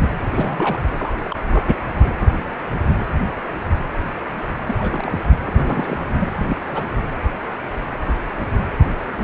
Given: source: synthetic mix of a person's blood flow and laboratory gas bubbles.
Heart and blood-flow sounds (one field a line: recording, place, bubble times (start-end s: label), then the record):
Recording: Doppler ultrasound of blood flow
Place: precordium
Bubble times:
0.00-0.09 s: bubbles
0.18-0.79 s: bubbles
0.97-1.14 s: bubbles
1.25-1.36 s: bubbles
1.51-1.68 s: bubbles
4.65-4.75 s: bubbles
4.79-5.21 s: bubbles
5.43-6.00 s: bubbles
6.19-6.84 s: bubbles
8.79-8.84 s: bubbles
9.11-9.24 s: bubbles
From the record:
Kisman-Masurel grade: 221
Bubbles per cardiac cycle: several, 3 to 8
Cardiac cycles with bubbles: 10 to 50%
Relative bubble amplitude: barely perceptible (0.100 to 0.250)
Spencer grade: 2 (many but less than half of the cardiac periods contain bubble signals, singularly or in groups)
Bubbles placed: anywhere in the cardiac cycle